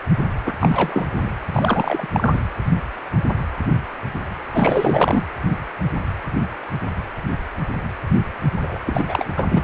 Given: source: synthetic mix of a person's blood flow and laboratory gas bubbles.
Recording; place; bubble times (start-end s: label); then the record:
Doppler ultrasound of blood flow; precordium
0.46-0.54 s: bubbles
0.60-1.29 s: bubbles
1.52-2.06 s: bubbles
2.13-2.40 s: bubbles
4.42-5.24 s: bubbles
8.62-8.78 s: bubbles
8.86-9.26 s: bubbles
9.37-9.64 s: bubbles
From the record:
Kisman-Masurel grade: 333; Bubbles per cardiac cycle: rolling drumbeat, 9 or more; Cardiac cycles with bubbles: 50 to 99%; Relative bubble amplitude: loud (0.450 to 0.775); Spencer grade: 3 (all of the cardiac periods contain showers or single bubble signals, but not dominating or overriding the cardiac motion signals); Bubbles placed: anywhere in the cardiac cycle